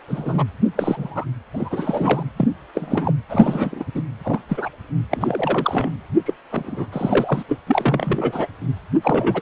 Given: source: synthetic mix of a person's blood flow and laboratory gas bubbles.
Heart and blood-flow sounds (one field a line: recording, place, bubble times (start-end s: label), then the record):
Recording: Doppler ultrasound of blood flow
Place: precordium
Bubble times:
0.08-0.45 s: bubbles
0.76-1.25 s: bubbles
1.53-2.28 s: bubbles
2.37-2.48 s: bubbles
2.73-3.13 s: bubbles
3.29-3.85 s: bubbles
3.94-4.02 s: bubbles
4.24-4.40 s: bubbles
4.49-4.69 s: bubbles
5.11-5.91 s: bubbles
6.25-6.33 s: bubbles
6.51-6.86 s: bubbles
6.92-7.44 s: bubbles
7.49-7.60 s: bubbles
7.67-8.47 s: bubbles
9.02-9.42 s: bubbles
From the record:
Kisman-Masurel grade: 243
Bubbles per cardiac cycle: several, 3 to 8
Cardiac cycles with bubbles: 100%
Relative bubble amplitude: loud (0.450 to 0.775)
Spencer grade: 3 (all of the cardiac periods contain showers or single bubble signals, but not dominating or overriding the cardiac motion signals)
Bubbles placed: anywhere in the cardiac cycle